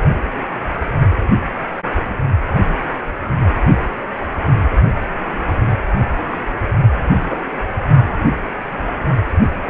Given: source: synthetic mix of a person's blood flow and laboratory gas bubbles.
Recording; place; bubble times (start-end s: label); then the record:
Doppler ultrasound of blood flow; precordium
7.23-7.39 s: bubbles
From the record:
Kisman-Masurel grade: 113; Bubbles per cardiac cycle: 1 to 2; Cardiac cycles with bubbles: 1 to 10%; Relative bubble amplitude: loud (0.450 to 0.775); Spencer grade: 1 (occasional bubble signal discernible with the cardiac motion signal, with majority of cardiac periods free of bubbles); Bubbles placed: only in the low amplitude regions of the cardiac cycle